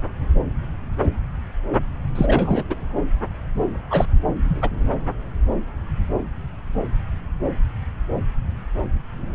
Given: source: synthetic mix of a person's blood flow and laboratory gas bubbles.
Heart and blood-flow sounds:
Doppler ultrasound of blood flow; subclavian vein
2.15-2.65 s: bubbles
2.69-2.75 s: bubbles
3.90-4.06 s: bubbles
4.45-4.69 s: bubbles
From the record:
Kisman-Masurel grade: 223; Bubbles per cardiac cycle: several, 3 to 8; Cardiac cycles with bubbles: 10 to 50%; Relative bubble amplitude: loud (0.450 to 0.775); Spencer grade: 2 (many but less than half of the cardiac periods contain bubble signals, singularly or in groups); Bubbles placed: anywhere in the cardiac cycle

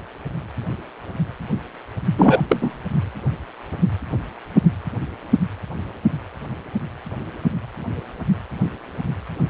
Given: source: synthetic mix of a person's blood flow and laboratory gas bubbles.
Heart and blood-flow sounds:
Doppler ultrasound of blood flow; precordium
2.17-2.42 s: bubbles
2.49-2.82 s: bubbles
From the record:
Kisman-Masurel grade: 213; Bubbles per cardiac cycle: several, 3 to 8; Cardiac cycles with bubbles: 1 to 10%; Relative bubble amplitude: loud (0.450 to 0.775); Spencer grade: 1 (occasional bubble signal discernible with the cardiac motion signal, with majority of cardiac periods free of bubbles); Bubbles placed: only in the low amplitude regions of the cardiac cycle

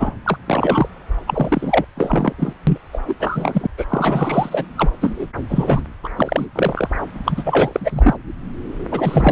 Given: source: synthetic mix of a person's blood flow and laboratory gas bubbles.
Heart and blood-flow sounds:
Doppler ultrasound of blood flow; subclavian vein
0.00-0.14 s: bubbles
0.24-0.38 s: bubbles
0.46-0.88 s: bubbles
1.27-1.85 s: bubbles
1.96-2.33 s: bubbles
2.39-2.53 s: bubbles
2.67-2.78 s: bubbles
2.93-2.98 s: bubbles
3.08-3.15 s: bubbles
3.20-3.67 s: bubbles
3.78-3.85 s: bubbles
3.88-4.66 s: bubbles
4.76-4.90 s: bubbles
5.01-5.26 s: bubbles
5.49-5.82 s: bubbles
6.04-6.08 s: bubbles
6.17-6.46 s: bubbles
6.55-6.88 s: bubbles
7.25-8.17 s: bubbles
8.92-9.32 s: bubbles
From the record:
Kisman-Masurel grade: 343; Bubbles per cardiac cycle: rolling drumbeat, 9 or more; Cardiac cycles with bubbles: 100%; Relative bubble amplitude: loud (0.450 to 0.775); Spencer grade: 3 (all of the cardiac periods contain showers or single bubble signals, but not dominating or overriding the cardiac motion signals); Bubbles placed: anywhere in the cardiac cycle

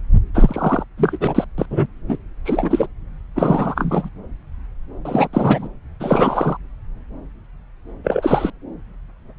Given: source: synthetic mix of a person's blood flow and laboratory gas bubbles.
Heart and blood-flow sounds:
Doppler ultrasound of blood flow; subclavian vein
0.34-0.85 s: bubbles
0.97-1.44 s: bubbles
1.58-1.66 s: bubbles
1.70-1.87 s: bubbles
2.08-2.17 s: bubbles
2.45-2.87 s: bubbles
3.35-4.09 s: bubbles
5.05-5.28 s: bubbles
5.33-5.69 s: bubbles
5.99-6.57 s: bubbles
8.04-8.50 s: bubbles
From the record:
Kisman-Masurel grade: 233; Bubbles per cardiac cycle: several, 3 to 8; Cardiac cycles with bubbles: 50 to 99%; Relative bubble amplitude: loud (0.450 to 0.775); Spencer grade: 3 (all of the cardiac periods contain showers or single bubble signals, but not dominating or overriding the cardiac motion signals); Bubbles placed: anywhere in the cardiac cycle

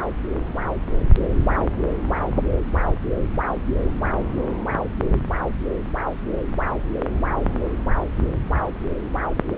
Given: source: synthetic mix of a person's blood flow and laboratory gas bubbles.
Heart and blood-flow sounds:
Doppler ultrasound of blood flow; subclavian vein
no bubbles
From the record:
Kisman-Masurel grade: 000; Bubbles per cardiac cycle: 0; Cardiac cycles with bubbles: 0%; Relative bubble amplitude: no bubbles discernible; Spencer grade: 0 (complete lack of bubble signals)

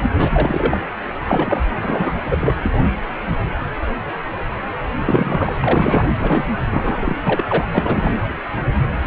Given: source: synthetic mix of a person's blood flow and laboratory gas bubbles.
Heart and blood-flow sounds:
Doppler ultrasound of blood flow; precordium
0.02-0.10 s: bubbles
0.19-0.80 s: bubbles
1.25-1.65 s: bubbles
1.81-2.13 s: bubbles
2.30-2.38 s: bubbles
2.40-2.55 s: bubbles
2.61-2.70 s: bubbles
2.73-2.78 s: bubbles
5.04-5.55 s: bubbles
5.60-6.10 s: bubbles
6.19-6.45 s: bubbles
6.71-7.15 s: bubbles
7.26-7.44 s: bubbles
7.48-7.65 s: bubbles
7.73-8.17 s: bubbles
From the record:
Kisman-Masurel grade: 233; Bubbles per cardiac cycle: several, 3 to 8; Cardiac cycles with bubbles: 50 to 99%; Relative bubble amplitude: loud (0.450 to 0.775); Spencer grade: 3 (all of the cardiac periods contain showers or single bubble signals, but not dominating or overriding the cardiac motion signals); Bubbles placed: anywhere in the cardiac cycle

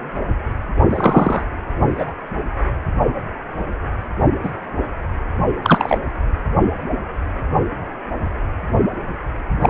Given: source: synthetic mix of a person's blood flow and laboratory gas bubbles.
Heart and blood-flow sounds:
Doppler ultrasound of blood flow; precordium
0.90-1.45 s: bubbles
1.91-2.12 s: bubbles
4.42-4.50 s: bubbles
5.62-5.98 s: bubbles
9.61-9.69 s: bubbles
From the record:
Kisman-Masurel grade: 123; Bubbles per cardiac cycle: 1 to 2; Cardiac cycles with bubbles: 10 to 50%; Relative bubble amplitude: loud (0.450 to 0.775); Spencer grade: 2 (many but less than half of the cardiac periods contain bubble signals, singularly or in groups); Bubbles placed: only in the low amplitude regions of the cardiac cycle

